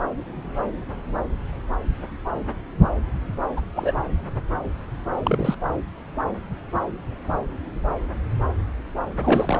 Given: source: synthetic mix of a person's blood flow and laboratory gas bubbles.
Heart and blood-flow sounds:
Doppler ultrasound of blood flow; subclavian vein
3.56-3.61 s: bubbles
3.74-3.93 s: bubbles
5.24-5.55 s: bubbles
9.20-9.60 s: bubbles
From the record:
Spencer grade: 2 (many but less than half of the cardiac periods contain bubble signals, singularly or in groups); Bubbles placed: anywhere in the cardiac cycle

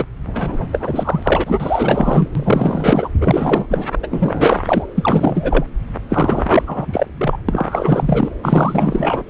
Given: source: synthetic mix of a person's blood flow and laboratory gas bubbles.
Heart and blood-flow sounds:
Doppler ultrasound of blood flow; subclavian vein
0.00-0.05 s: bubbles
0.26-0.68 s: bubbles
0.72-2.29 s: bubbles
2.35-3.08 s: bubbles
3.21-3.85 s: bubbles
4.02-4.08 s: bubbles
4.10-4.86 s: bubbles
4.97-5.65 s: bubbles
6.09-7.38 s: bubbles
7.48-8.29 s: bubbles
8.43-9.23 s: bubbles
From the record:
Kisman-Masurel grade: 444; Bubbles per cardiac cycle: continuous sound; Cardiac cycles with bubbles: 100%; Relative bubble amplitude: maximal (0.775 to 0.999); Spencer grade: 4 (maximum detectable bubble signal sounding continuously throughout systole and diastole of every cardiac period, and overriding the amplitude of the normal cardiac signals); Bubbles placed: anywhere in the cardiac cycle

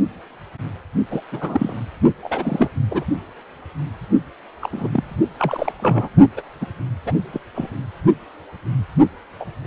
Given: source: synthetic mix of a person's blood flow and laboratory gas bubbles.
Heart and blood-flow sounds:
Doppler ultrasound of blood flow; precordium
1.10-1.21 s: bubbles
1.31-1.81 s: bubbles
2.23-2.71 s: bubbles
2.90-3.04 s: bubbles
4.61-4.70 s: bubbles
4.72-5.20 s: bubbles
5.38-5.72 s: bubbles
5.79-6.09 s: bubbles
6.37-6.42 s: bubbles
6.61-6.66 s: bubbles
7.05-7.12 s: bubbles
7.33-7.41 s: bubbles
7.55-7.68 s: bubbles
9.39-9.45 s: bubbles
9.62-9.67 s: bubbles
From the record:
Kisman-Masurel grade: 232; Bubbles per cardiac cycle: several, 3 to 8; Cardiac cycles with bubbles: 50 to 99%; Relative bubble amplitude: moderate (0.250 to 0.450); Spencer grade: 3 (all of the cardiac periods contain showers or single bubble signals, but not dominating or overriding the cardiac motion signals); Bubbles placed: only in the low amplitude regions of the cardiac cycle

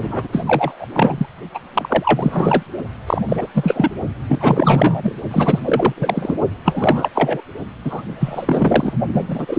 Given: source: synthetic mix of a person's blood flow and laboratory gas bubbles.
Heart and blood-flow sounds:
Doppler ultrasound of blood flow; precordium
0.02-0.28 s: bubbles
0.32-0.86 s: bubbles
0.93-1.27 s: bubbles
1.54-1.59 s: bubbles
1.74-2.63 s: bubbles
3.06-3.22 s: bubbles
3.28-3.47 s: bubbles
3.54-3.91 s: bubbles
4.29-5.15 s: bubbles
5.31-5.60 s: bubbles
5.65-5.93 s: bubbles
5.96-6.36 s: bubbles
6.65-7.10 s: bubbles
7.15-7.42 s: bubbles
7.83-8.02 s: bubbles
8.19-8.93 s: bubbles
9.13-9.58 s: bubbles
From the record:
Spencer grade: 3 (all of the cardiac periods contain showers or single bubble signals, but not dominating or overriding the cardiac motion signals); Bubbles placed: only in the low amplitude regions of the cardiac cycle

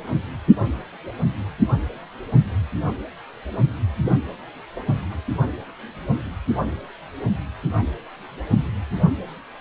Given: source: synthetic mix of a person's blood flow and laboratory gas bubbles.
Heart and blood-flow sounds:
Doppler ultrasound of blood flow; precordium
5.03-5.16 s: bubbles
From the record:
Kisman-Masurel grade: 121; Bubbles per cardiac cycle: 1 to 2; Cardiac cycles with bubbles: 10 to 50%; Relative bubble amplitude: barely perceptible (0.100 to 0.250); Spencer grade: 2 (many but less than half of the cardiac periods contain bubble signals, singularly or in groups); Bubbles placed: only in the low amplitude regions of the cardiac cycle

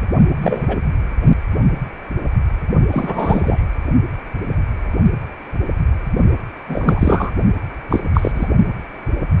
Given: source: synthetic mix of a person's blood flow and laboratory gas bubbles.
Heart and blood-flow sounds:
Doppler ultrasound of blood flow; precordium
0.41-0.77 s: bubbles
2.91-3.62 s: bubbles
6.67-7.31 s: bubbles
7.90-8.03 s: bubbles
8.14-8.47 s: bubbles
From the record:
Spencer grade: 2 (many but less than half of the cardiac periods contain bubble signals, singularly or in groups); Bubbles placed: only in the low amplitude regions of the cardiac cycle

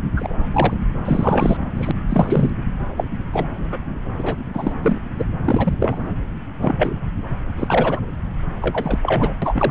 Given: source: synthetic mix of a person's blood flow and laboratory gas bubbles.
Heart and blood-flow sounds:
Doppler ultrasound of blood flow; subclavian vein
0.16-0.32 s: bubbles
0.52-0.77 s: bubbles
1.05-1.57 s: bubbles
1.75-1.91 s: bubbles
2.10-2.50 s: bubbles
2.96-3.04 s: bubbles
3.33-3.46 s: bubbles
3.71-3.78 s: bubbles
4.19-4.36 s: bubbles
4.54-4.72 s: bubbles
4.82-4.98 s: bubbles
5.19-5.26 s: bubbles
5.45-5.73 s: bubbles
5.79-6.12 s: bubbles
6.62-6.99 s: bubbles
7.56-8.00 s: bubbles
8.62-8.99 s: bubbles
9.03-9.34 s: bubbles
9.42-9.71 s: bubbles
From the record:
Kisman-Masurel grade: 233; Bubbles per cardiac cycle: several, 3 to 8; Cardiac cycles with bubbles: 50 to 99%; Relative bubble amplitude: loud (0.450 to 0.775); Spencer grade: 3 (all of the cardiac periods contain showers or single bubble signals, but not dominating or overriding the cardiac motion signals); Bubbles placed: anywhere in the cardiac cycle

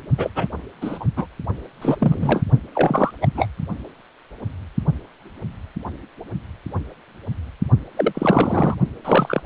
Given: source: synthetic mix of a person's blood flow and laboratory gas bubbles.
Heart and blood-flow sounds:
Doppler ultrasound of blood flow; precordium
0.18-0.30 s: bubbles
0.35-0.47 s: bubbles
0.81-1.05 s: bubbles
1.16-1.26 s: bubbles
1.82-1.97 s: bubbles
1.99-2.44 s: bubbles
2.75-3.11 s: bubbles
3.21-3.28 s: bubbles
3.34-3.47 s: bubbles
7.96-8.75 s: bubbles
9.04-9.42 s: bubbles
From the record:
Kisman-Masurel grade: 233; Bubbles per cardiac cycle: several, 3 to 8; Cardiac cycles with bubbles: 50 to 99%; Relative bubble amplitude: loud (0.450 to 0.775); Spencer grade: 3 (all of the cardiac periods contain showers or single bubble signals, but not dominating or overriding the cardiac motion signals); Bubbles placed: only in the low amplitude regions of the cardiac cycle

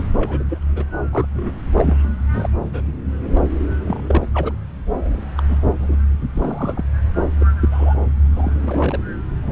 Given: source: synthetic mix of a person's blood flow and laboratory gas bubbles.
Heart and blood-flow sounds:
Doppler ultrasound of blood flow; subclavian vein
0.17-0.43 s: bubbles
0.48-0.58 s: bubbles
0.76-0.84 s: bubbles
1.12-1.27 s: bubbles
1.33-1.52 s: bubbles
1.73-1.99 s: bubbles
2.32-2.49 s: bubbles
2.61-2.93 s: bubbles
3.35-3.48 s: bubbles
3.86-4.28 s: bubbles
4.33-4.55 s: bubbles
4.93-5.24 s: bubbles
5.37-5.43 s: bubbles
5.49-5.61 s: bubbles
5.79-5.98 s: bubbles
6.36-6.84 s: bubbles
7.40-7.46 s: bubbles
7.61-7.96 s: bubbles
8.36-8.52 s: bubbles
8.61-9.00 s: bubbles
9.42-9.51 s: bubbles
From the record:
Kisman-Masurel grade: 242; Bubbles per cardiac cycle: several, 3 to 8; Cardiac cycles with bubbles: 100%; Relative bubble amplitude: moderate (0.250 to 0.450); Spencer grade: 3 (all of the cardiac periods contain showers or single bubble signals, but not dominating or overriding the cardiac motion signals); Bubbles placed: anywhere in the cardiac cycle

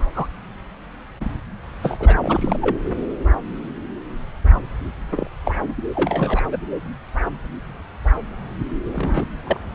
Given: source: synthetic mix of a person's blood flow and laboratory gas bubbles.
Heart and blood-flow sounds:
Doppler ultrasound of blood flow; subclavian vein
0.14-0.27 s: bubbles
1.82-2.77 s: bubbles
5.12-5.27 s: bubbles
5.45-5.52 s: bubbles
5.95-6.42 s: bubbles
6.51-6.58 s: bubbles
8.93-9.24 s: bubbles
9.46-9.57 s: bubbles
From the record:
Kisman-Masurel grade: 232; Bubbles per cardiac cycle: several, 3 to 8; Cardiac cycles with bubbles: 50 to 99%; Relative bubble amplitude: moderate (0.250 to 0.450); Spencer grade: 3 (all of the cardiac periods contain showers or single bubble signals, but not dominating or overriding the cardiac motion signals); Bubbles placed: anywhere in the cardiac cycle

